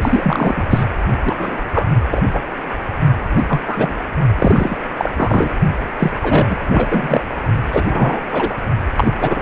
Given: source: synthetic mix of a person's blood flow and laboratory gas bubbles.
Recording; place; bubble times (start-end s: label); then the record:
Doppler ultrasound of blood flow; precordium
0.02-0.63 s: bubbles
0.70-0.84 s: bubbles
1.24-1.64 s: bubbles
1.73-1.88 s: bubbles
2.11-2.23 s: bubbles
2.33-2.40 s: bubbles
3.35-3.46 s: bubbles
3.48-3.61 s: bubbles
3.67-3.95 s: bubbles
4.38-4.79 s: bubbles
4.98-5.12 s: bubbles
5.16-5.54 s: bubbles
5.98-6.12 s: bubbles
6.21-6.66 s: bubbles
6.69-6.88 s: bubbles
6.91-7.21 s: bubbles
7.73-8.22 s: bubbles
8.31-8.62 s: bubbles
8.97-9.14 s: bubbles
9.21-9.42 s: bubbles
From the record:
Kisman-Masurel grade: 243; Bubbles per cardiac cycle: several, 3 to 8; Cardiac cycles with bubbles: 100%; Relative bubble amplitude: loud (0.450 to 0.775); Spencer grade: 3 (all of the cardiac periods contain showers or single bubble signals, but not dominating or overriding the cardiac motion signals); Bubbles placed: only in the low amplitude regions of the cardiac cycle